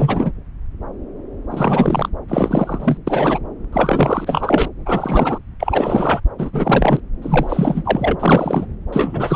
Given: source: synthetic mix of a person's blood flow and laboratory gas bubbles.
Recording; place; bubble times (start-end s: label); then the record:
Doppler ultrasound of blood flow; subclavian vein
0.00-0.31 s: bubbles
1.50-2.09 s: bubbles
2.28-2.97 s: bubbles
3.07-3.39 s: bubbles
3.72-4.69 s: bubbles
4.85-5.38 s: bubbles
5.59-6.20 s: bubbles
6.38-6.50 s: bubbles
6.52-7.00 s: bubbles
7.22-8.66 s: bubbles
8.93-9.36 s: bubbles
From the record:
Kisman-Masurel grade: 333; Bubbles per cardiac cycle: rolling drumbeat, 9 or more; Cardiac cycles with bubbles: 50 to 99%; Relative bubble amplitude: loud (0.450 to 0.775); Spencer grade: 3 (all of the cardiac periods contain showers or single bubble signals, but not dominating or overriding the cardiac motion signals); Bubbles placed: anywhere in the cardiac cycle